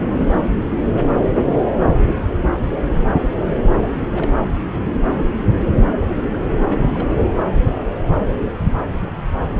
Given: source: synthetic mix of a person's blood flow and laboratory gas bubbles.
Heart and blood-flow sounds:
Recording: Doppler ultrasound of blood flow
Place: subclavian vein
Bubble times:
0.13-0.27 s: bubbles
3.82-4.38 s: bubbles
6.02-6.06 s: bubbles
6.10-6.13 s: bubbles
6.17-6.22 s: bubbles
6.34-6.37 s: bubbles
6.69-7.15 s: bubbles
9.51-9.60 s: bubbles
From the record:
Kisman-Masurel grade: 221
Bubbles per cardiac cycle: several, 3 to 8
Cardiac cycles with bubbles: 10 to 50%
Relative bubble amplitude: barely perceptible (0.100 to 0.250)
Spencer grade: 2 (many but less than half of the cardiac periods contain bubble signals, singularly or in groups)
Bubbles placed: anywhere in the cardiac cycle

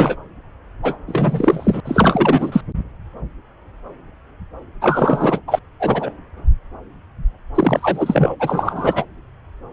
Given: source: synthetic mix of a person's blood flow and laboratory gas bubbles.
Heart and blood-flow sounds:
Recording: Doppler ultrasound of blood flow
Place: subclavian vein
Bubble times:
0.00-0.16 s: bubbles
0.82-0.97 s: bubbles
1.07-1.80 s: bubbles
1.84-2.61 s: bubbles
4.81-5.40 s: bubbles
5.47-5.59 s: bubbles
5.79-6.13 s: bubbles
7.54-8.36 s: bubbles
8.40-9.05 s: bubbles
From the record:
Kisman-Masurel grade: 333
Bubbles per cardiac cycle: rolling drumbeat, 9 or more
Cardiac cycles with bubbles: 50 to 99%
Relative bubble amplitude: loud (0.450 to 0.775)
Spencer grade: 3 (all of the cardiac periods contain showers or single bubble signals, but not dominating or overriding the cardiac motion signals)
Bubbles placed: anywhere in the cardiac cycle

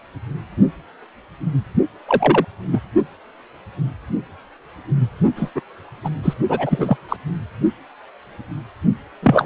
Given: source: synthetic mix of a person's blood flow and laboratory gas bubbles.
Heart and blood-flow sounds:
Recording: Doppler ultrasound of blood flow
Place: precordium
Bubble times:
2.08-2.45 s: bubbles
2.72-2.80 s: bubbles
5.36-5.50 s: bubbles
5.55-5.61 s: bubbles
6.04-6.09 s: bubbles
6.23-6.33 s: bubbles
6.49-6.96 s: bubbles
7.08-7.17 s: bubbles
9.22-9.46 s: bubbles
From the record:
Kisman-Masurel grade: 233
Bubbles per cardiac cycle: several, 3 to 8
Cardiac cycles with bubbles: 50 to 99%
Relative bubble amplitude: loud (0.450 to 0.775)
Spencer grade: 3 (all of the cardiac periods contain showers or single bubble signals, but not dominating or overriding the cardiac motion signals)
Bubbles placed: only in the low amplitude regions of the cardiac cycle

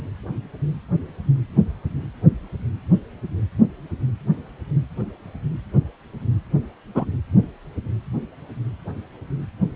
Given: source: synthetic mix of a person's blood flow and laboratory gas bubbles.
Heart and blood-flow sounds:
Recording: Doppler ultrasound of blood flow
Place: precordium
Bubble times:
6.95-7.05 s: bubbles
From the record:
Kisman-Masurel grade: 113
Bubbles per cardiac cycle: 1 to 2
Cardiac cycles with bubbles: 1 to 10%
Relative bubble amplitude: loud (0.450 to 0.775)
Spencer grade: 1 (occasional bubble signal discernible with the cardiac motion signal, with majority of cardiac periods free of bubbles)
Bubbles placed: anywhere in the cardiac cycle

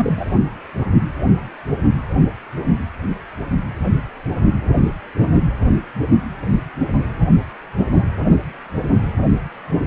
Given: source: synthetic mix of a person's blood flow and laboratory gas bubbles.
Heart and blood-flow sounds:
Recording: Doppler ultrasound of blood flow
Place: precordium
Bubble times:
0.00-0.40 s: bubbles
From the record:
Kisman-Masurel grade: 112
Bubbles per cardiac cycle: 1 to 2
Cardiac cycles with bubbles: 1 to 10%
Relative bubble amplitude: moderate (0.250 to 0.450)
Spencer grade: 1 (occasional bubble signal discernible with the cardiac motion signal, with majority of cardiac periods free of bubbles)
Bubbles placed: anywhere in the cardiac cycle

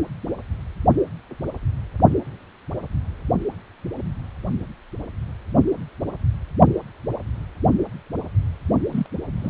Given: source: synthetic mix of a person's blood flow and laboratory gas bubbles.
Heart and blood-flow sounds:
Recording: Doppler ultrasound of blood flow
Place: precordium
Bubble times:
8.90-9.06 s: bubbles
9.41-9.50 s: bubbles
From the record:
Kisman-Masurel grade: 111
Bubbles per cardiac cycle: 1 to 2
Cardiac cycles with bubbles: 1 to 10%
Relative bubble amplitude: barely perceptible (0.100 to 0.250)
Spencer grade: 1 (occasional bubble signal discernible with the cardiac motion signal, with majority of cardiac periods free of bubbles)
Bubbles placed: only in the low amplitude regions of the cardiac cycle

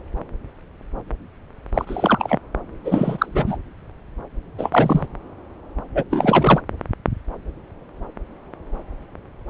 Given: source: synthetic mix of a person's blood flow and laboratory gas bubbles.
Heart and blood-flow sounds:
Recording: Doppler ultrasound of blood flow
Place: subclavian vein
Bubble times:
1.74-2.38 s: bubbles
2.84-3.57 s: bubbles
4.58-5.07 s: bubbles
5.95-6.04 s: bubbles
6.10-6.61 s: bubbles
From the record:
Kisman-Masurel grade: 223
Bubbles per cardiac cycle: several, 3 to 8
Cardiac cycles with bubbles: 10 to 50%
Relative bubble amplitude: loud (0.450 to 0.775)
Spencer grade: 2 (many but less than half of the cardiac periods contain bubble signals, singularly or in groups)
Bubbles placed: anywhere in the cardiac cycle

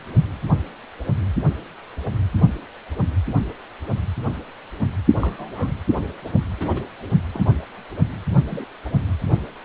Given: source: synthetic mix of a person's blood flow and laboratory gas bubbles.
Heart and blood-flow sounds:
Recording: Doppler ultrasound of blood flow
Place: precordium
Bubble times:
5.20-5.73 s: bubbles
6.58-6.85 s: bubbles
7.33-7.44 s: bubbles
8.48-8.71 s: bubbles
From the record:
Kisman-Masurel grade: 121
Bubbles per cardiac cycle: 1 to 2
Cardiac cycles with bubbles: 10 to 50%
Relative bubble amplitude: barely perceptible (0.100 to 0.250)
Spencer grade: 2 (many but less than half of the cardiac periods contain bubble signals, singularly or in groups)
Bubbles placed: only in the low amplitude regions of the cardiac cycle

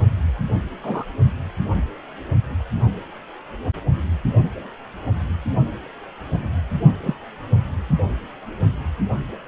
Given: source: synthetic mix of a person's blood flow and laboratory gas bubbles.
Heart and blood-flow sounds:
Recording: Doppler ultrasound of blood flow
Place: precordium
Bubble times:
0.82-1.04 s: bubbles
6.31-6.38 s: bubbles
7.02-7.14 s: bubbles
From the record:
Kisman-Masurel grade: 122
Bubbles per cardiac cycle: 1 to 2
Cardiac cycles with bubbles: 10 to 50%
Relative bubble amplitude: moderate (0.250 to 0.450)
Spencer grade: 2 (many but less than half of the cardiac periods contain bubble signals, singularly or in groups)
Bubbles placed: anywhere in the cardiac cycle

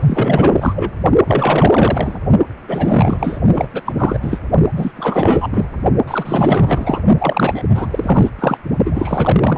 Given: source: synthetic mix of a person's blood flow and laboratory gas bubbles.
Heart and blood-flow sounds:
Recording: Doppler ultrasound of blood flow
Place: precordium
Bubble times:
0.01-0.90 s: bubbles
1.26-2.19 s: bubbles
2.68-3.39 s: bubbles
3.51-3.68 s: bubbles
3.73-3.81 s: bubbles
3.85-3.93 s: bubbles
3.97-4.19 s: bubbles
4.22-4.40 s: bubbles
4.75-4.92 s: bubbles
4.94-5.48 s: bubbles
5.52-5.65 s: bubbles
6.07-7.00 s: bubbles
7.18-7.63 s: bubbles
7.69-7.88 s: bubbles
7.90-8.30 s: bubbles
8.38-8.57 s: bubbles
8.85-9.58 s: bubbles
From the record:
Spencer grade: 4 (maximum detectable bubble signal sounding continuously throughout systole and diastole of every cardiac period, and overriding the amplitude of the normal cardiac signals)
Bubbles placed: only in the low amplitude regions of the cardiac cycle

